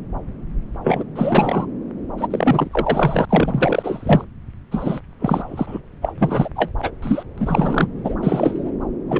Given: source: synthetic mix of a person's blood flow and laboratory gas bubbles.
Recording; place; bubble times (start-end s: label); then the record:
Doppler ultrasound of blood flow; subclavian vein
0.84-1.04 s: bubbles
1.15-1.67 s: bubbles
2.17-3.25 s: bubbles
3.29-4.25 s: bubbles
4.71-5.00 s: bubbles
5.20-5.79 s: bubbles
6.02-6.13 s: bubbles
6.18-6.50 s: bubbles
6.56-6.72 s: bubbles
6.79-6.92 s: bubbles
7.02-7.23 s: bubbles
7.38-7.88 s: bubbles
8.04-8.15 s: bubbles
8.21-8.71 s: bubbles
9.08-9.20 s: bubbles
From the record:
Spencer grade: 3 (all of the cardiac periods contain showers or single bubble signals, but not dominating or overriding the cardiac motion signals); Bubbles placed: anywhere in the cardiac cycle